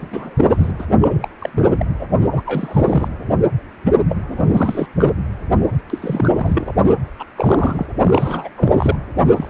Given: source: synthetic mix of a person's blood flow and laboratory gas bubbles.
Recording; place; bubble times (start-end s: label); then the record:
Doppler ultrasound of blood flow; precordium
0.00-0.72 s: bubbles
0.79-0.86 s: bubbles
1.01-1.28 s: bubbles
1.40-1.50 s: bubbles
1.52-1.85 s: bubbles
2.00-2.07 s: bubbles
2.17-2.42 s: bubbles
2.46-3.08 s: bubbles
3.85-3.92 s: bubbles
4.08-4.87 s: bubbles
4.97-5.15 s: bubbles
5.60-5.81 s: bubbles
5.90-6.73 s: bubbles
6.88-6.95 s: bubbles
7.19-7.24 s: bubbles
7.37-7.86 s: bubbles
8.01-8.49 s: bubbles
8.55-8.96 s: bubbles
9.36-9.50 s: bubbles
From the record:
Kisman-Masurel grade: 342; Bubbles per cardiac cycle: rolling drumbeat, 9 or more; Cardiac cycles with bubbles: 100%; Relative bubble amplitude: moderate (0.250 to 0.450); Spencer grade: 3 (all of the cardiac periods contain showers or single bubble signals, but not dominating or overriding the cardiac motion signals); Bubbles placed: anywhere in the cardiac cycle